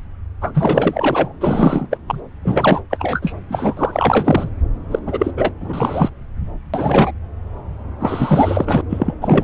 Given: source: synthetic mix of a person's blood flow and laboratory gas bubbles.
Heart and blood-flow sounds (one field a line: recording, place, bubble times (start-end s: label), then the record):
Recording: Doppler ultrasound of blood flow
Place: subclavian vein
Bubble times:
0.41-1.32 s: bubbles
1.40-1.87 s: bubbles
1.91-1.97 s: bubbles
2.07-2.20 s: bubbles
2.45-2.81 s: bubbles
2.90-3.35 s: bubbles
3.48-4.48 s: bubbles
4.91-4.99 s: bubbles
5.06-5.31 s: bubbles
5.36-5.54 s: bubbles
5.60-6.09 s: bubbles
6.73-7.12 s: bubbles
7.99-8.81 s: bubbles
8.89-9.14 s: bubbles
9.21-9.44 s: bubbles
From the record:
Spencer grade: 4 (maximum detectable bubble signal sounding continuously throughout systole and diastole of every cardiac period, and overriding the amplitude of the normal cardiac signals)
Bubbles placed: anywhere in the cardiac cycle